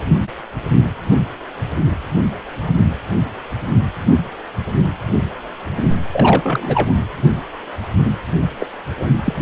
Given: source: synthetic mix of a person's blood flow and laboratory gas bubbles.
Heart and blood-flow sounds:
Doppler ultrasound of blood flow; precordium
6.12-6.93 s: bubbles
8.60-8.68 s: bubbles
8.98-9.11 s: bubbles
9.24-9.34 s: bubbles
From the record:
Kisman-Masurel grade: 222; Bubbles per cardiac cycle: several, 3 to 8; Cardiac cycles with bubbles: 10 to 50%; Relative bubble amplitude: moderate (0.250 to 0.450); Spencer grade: 2 (many but less than half of the cardiac periods contain bubble signals, singularly or in groups); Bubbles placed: anywhere in the cardiac cycle

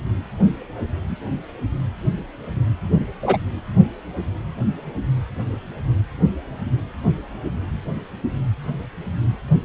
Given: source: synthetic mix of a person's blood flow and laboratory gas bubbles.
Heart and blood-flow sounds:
Doppler ultrasound of blood flow; precordium
3.22-3.37 s: bubbles
From the record:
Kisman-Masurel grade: 113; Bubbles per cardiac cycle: 1 to 2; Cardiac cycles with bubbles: 1 to 10%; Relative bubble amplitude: loud (0.450 to 0.775); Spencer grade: 1 (occasional bubble signal discernible with the cardiac motion signal, with majority of cardiac periods free of bubbles); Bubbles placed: anywhere in the cardiac cycle

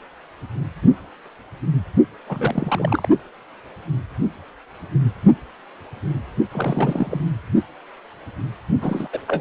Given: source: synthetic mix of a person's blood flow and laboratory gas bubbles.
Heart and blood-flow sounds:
Doppler ultrasound of blood flow; precordium
2.29-3.08 s: bubbles
6.51-7.21 s: bubbles
8.81-9.08 s: bubbles
9.13-9.21 s: bubbles
9.28-9.41 s: bubbles
From the record:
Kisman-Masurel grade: 232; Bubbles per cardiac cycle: several, 3 to 8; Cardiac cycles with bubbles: 50 to 99%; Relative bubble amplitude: moderate (0.250 to 0.450); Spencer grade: 3 (all of the cardiac periods contain showers or single bubble signals, but not dominating or overriding the cardiac motion signals); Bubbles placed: only in the low amplitude regions of the cardiac cycle

